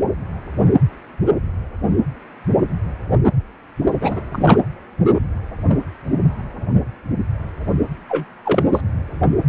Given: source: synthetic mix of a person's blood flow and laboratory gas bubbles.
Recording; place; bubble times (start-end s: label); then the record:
Doppler ultrasound of blood flow; precordium
4.01-4.20 s: bubbles
4.32-4.58 s: bubbles
8.09-8.26 s: bubbles
8.45-8.80 s: bubbles
From the record:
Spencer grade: 1 (occasional bubble signal discernible with the cardiac motion signal, with majority of cardiac periods free of bubbles); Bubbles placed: anywhere in the cardiac cycle